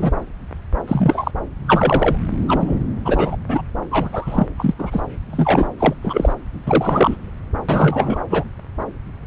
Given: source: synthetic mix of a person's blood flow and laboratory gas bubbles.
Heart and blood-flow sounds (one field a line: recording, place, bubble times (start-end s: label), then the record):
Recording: Doppler ultrasound of blood flow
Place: subclavian vein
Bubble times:
0.00-0.12 s: bubbles
0.88-1.31 s: bubbles
1.66-2.17 s: bubbles
2.47-2.78 s: bubbles
3.04-3.37 s: bubbles
3.49-3.61 s: bubbles
3.91-4.47 s: bubbles
4.58-4.74 s: bubbles
4.79-5.03 s: bubbles
5.31-5.68 s: bubbles
5.79-5.94 s: bubbles
6.02-6.33 s: bubbles
6.66-7.31 s: bubbles
7.68-8.25 s: bubbles
8.30-8.44 s: bubbles
From the record:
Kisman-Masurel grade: 233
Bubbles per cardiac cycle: several, 3 to 8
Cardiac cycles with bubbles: 50 to 99%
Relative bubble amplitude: loud (0.450 to 0.775)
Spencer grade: 3 (all of the cardiac periods contain showers or single bubble signals, but not dominating or overriding the cardiac motion signals)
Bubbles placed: anywhere in the cardiac cycle